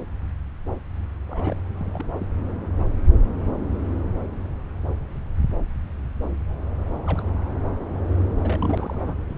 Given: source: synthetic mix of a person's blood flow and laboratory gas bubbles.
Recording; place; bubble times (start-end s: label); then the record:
Doppler ultrasound of blood flow; subclavian vein
1.29-1.60 s: bubbles
1.78-2.05 s: bubbles
2.19-2.26 s: bubbles
7.06-7.31 s: bubbles
8.42-9.15 s: bubbles
From the record:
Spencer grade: 2 (many but less than half of the cardiac periods contain bubble signals, singularly or in groups); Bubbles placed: anywhere in the cardiac cycle